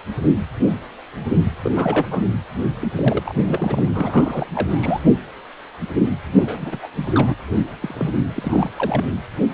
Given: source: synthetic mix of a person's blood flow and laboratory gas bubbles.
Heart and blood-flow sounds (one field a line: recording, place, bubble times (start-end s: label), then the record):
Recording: Doppler ultrasound of blood flow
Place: precordium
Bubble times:
1.62-1.72 s: bubbles
1.76-2.06 s: bubbles
2.10-2.25 s: bubbles
2.81-2.88 s: bubbles
2.96-3.35 s: bubbles
3.40-3.83 s: bubbles
3.94-4.46 s: bubbles
4.54-5.01 s: bubbles
6.37-6.79 s: bubbles
6.83-6.88 s: bubbles
7.14-7.35 s: bubbles
7.82-8.11 s: bubbles
8.35-8.70 s: bubbles
8.78-9.05 s: bubbles
From the record:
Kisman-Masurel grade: 332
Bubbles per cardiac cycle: rolling drumbeat, 9 or more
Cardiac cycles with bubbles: 50 to 99%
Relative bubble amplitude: moderate (0.250 to 0.450)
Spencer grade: 3 (all of the cardiac periods contain showers or single bubble signals, but not dominating or overriding the cardiac motion signals)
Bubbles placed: anywhere in the cardiac cycle